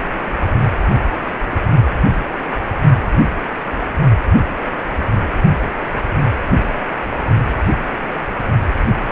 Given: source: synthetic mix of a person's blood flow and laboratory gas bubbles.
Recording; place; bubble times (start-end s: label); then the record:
Doppler ultrasound of blood flow; precordium
1.51-1.57 s: bubbles
1.75-1.82 s: bubbles
From the record:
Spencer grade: 1 (occasional bubble signal discernible with the cardiac motion signal, with majority of cardiac periods free of bubbles); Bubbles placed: only in the low amplitude regions of the cardiac cycle